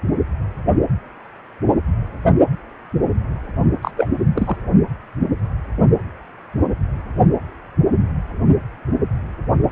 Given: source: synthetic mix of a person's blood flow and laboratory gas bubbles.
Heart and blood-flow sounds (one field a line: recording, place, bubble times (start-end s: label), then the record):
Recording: Doppler ultrasound of blood flow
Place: precordium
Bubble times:
3.82-3.91 s: bubbles
3.96-4.08 s: bubbles
4.35-4.57 s: bubbles
From the record:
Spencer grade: 2 (many but less than half of the cardiac periods contain bubble signals, singularly or in groups)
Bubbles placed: only in the low amplitude regions of the cardiac cycle